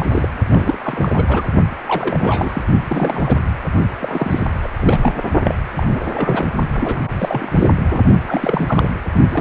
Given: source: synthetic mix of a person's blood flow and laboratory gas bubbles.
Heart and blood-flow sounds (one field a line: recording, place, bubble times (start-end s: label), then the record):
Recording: Doppler ultrasound of blood flow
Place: precordium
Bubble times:
0.00-0.06 s: bubbles
0.09-0.28 s: bubbles
0.50-0.78 s: bubbles
0.83-1.49 s: bubbles
1.86-2.63 s: bubbles
2.88-3.37 s: bubbles
4.00-4.43 s: bubbles
4.62-4.70 s: bubbles
4.77-5.13 s: bubbles
5.44-5.55 s: bubbles
5.76-6.47 s: bubbles
6.74-7.53 s: bubbles
7.55-7.68 s: bubbles
7.91-8.03 s: bubbles
8.27-8.91 s: bubbles
9.28-9.41 s: bubbles
From the record:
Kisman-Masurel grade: 342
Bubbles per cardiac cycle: rolling drumbeat, 9 or more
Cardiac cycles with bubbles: 100%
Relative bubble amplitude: moderate (0.250 to 0.450)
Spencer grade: 3 (all of the cardiac periods contain showers or single bubble signals, but not dominating or overriding the cardiac motion signals)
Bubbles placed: only in the low amplitude regions of the cardiac cycle